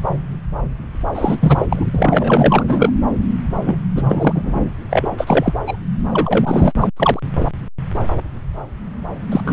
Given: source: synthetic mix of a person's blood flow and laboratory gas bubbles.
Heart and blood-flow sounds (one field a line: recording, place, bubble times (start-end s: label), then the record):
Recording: Doppler ultrasound of blood flow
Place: subclavian vein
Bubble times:
1.15-1.66 s: bubbles
1.70-1.88 s: bubbles
1.93-2.63 s: bubbles
2.67-2.92 s: bubbles
3.64-3.77 s: bubbles
3.95-4.70 s: bubbles
4.90-5.14 s: bubbles
5.17-5.54 s: bubbles
5.67-5.76 s: bubbles
6.12-6.72 s: bubbles
6.81-6.88 s: bubbles
6.96-7.20 s: bubbles
7.40-7.45 s: bubbles
9.31-9.40 s: bubbles
9.44-9.53 s: bubbles
From the record:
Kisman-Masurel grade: 333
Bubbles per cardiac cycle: rolling drumbeat, 9 or more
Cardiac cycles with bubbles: 50 to 99%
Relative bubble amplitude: loud (0.450 to 0.775)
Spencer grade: 3 (all of the cardiac periods contain showers or single bubble signals, but not dominating or overriding the cardiac motion signals)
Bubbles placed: anywhere in the cardiac cycle